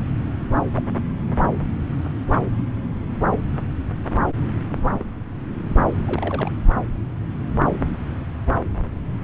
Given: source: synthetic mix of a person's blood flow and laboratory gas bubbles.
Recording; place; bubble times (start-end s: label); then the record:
Doppler ultrasound of blood flow; subclavian vein
0.76-0.82 s: bubbles
2.31-2.40 s: bubbles
3.30-3.39 s: bubbles
4.92-5.05 s: bubbles
6.06-6.51 s: bubbles
From the record:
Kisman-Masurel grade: 121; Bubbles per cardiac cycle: 1 to 2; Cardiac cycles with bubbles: 10 to 50%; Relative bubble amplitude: barely perceptible (0.100 to 0.250); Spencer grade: 2 (many but less than half of the cardiac periods contain bubble signals, singularly or in groups); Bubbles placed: anywhere in the cardiac cycle